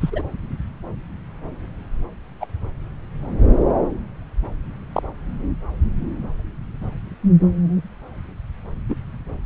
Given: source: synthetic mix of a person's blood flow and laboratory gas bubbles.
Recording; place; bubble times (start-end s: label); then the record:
Doppler ultrasound of blood flow; subclavian vein
0.00-0.22 s: bubbles
2.40-2.46 s: bubbles
4.93-5.02 s: bubbles
8.89-8.96 s: bubbles
From the record:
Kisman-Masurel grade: 122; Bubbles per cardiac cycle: 1 to 2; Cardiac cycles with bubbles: 10 to 50%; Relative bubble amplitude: moderate (0.250 to 0.450); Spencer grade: 2 (many but less than half of the cardiac periods contain bubble signals, singularly or in groups); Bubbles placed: anywhere in the cardiac cycle